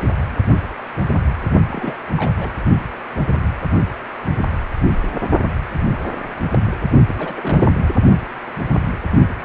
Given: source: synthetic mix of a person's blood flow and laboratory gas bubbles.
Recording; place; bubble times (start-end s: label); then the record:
Doppler ultrasound of blood flow; precordium
1.71-1.97 s: bubbles
2.17-2.58 s: bubbles
7.08-7.74 s: bubbles
From the record:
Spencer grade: 2 (many but less than half of the cardiac periods contain bubble signals, singularly or in groups); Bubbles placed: only in the low amplitude regions of the cardiac cycle